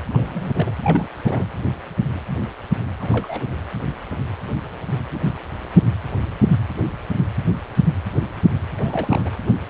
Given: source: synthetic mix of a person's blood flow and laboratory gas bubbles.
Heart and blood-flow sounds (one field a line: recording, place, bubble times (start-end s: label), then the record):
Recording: Doppler ultrasound of blood flow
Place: precordium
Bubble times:
0.12-0.72 s: bubbles
0.83-1.09 s: bubbles
1.24-1.47 s: bubbles
3.00-3.46 s: bubbles
8.75-9.30 s: bubbles
From the record:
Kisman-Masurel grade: 221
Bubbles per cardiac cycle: several, 3 to 8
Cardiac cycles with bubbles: 10 to 50%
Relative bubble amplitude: barely perceptible (0.100 to 0.250)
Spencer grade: 2 (many but less than half of the cardiac periods contain bubble signals, singularly or in groups)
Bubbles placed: anywhere in the cardiac cycle